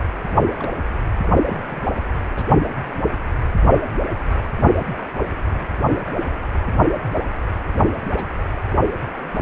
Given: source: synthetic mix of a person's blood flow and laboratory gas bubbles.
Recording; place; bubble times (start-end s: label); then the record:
Doppler ultrasound of blood flow; precordium
0.28-0.41 s: bubbles
0.55-0.72 s: bubbles
1.33-1.81 s: bubbles
2.37-2.55 s: bubbles
2.84-3.01 s: bubbles
4.58-4.67 s: bubbles
5.46-5.67 s: bubbles
5.92-6.01 s: bubbles
8.16-8.24 s: bubbles
From the record:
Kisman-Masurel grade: 121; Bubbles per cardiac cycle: 1 to 2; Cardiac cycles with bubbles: 10 to 50%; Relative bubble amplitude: barely perceptible (0.100 to 0.250); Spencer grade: 2 (many but less than half of the cardiac periods contain bubble signals, singularly or in groups); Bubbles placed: anywhere in the cardiac cycle